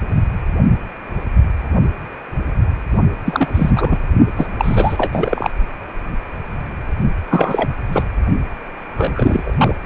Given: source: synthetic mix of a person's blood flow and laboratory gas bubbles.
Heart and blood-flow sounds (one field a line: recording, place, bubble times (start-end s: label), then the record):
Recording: Doppler ultrasound of blood flow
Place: precordium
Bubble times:
3.25-3.98 s: bubbles
4.37-4.47 s: bubbles
4.58-5.50 s: bubbles
7.30-7.70 s: bubbles
7.92-8.03 s: bubbles
8.95-9.74 s: bubbles
9.82-9.86 s: bubbles
From the record:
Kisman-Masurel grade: 333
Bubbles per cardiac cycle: rolling drumbeat, 9 or more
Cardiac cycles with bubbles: 50 to 99%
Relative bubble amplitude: loud (0.450 to 0.775)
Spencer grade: 3 (all of the cardiac periods contain showers or single bubble signals, but not dominating or overriding the cardiac motion signals)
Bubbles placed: only in the low amplitude regions of the cardiac cycle